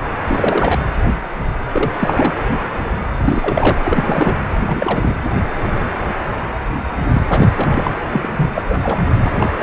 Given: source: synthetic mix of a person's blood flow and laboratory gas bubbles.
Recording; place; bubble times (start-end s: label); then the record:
Doppler ultrasound of blood flow; precordium
0.18-0.24 s: bubbles
0.27-0.79 s: bubbles
1.73-1.92 s: bubbles
1.96-2.34 s: bubbles
3.25-3.78 s: bubbles
3.84-4.37 s: bubbles
4.67-5.15 s: bubbles
7.13-7.22 s: bubbles
7.30-7.49 s: bubbles
7.57-7.67 s: bubbles
7.71-7.91 s: bubbles
8.12-8.31 s: bubbles
8.37-8.51 s: bubbles
8.55-8.65 s: bubbles
8.69-8.78 s: bubbles
8.83-9.04 s: bubbles
9.23-9.49 s: bubbles
9.60-9.63 s: bubbles
From the record:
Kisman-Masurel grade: 332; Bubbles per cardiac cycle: rolling drumbeat, 9 or more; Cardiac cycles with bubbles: 50 to 99%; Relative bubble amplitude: moderate (0.250 to 0.450); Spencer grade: 3 (all of the cardiac periods contain showers or single bubble signals, but not dominating or overriding the cardiac motion signals); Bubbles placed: anywhere in the cardiac cycle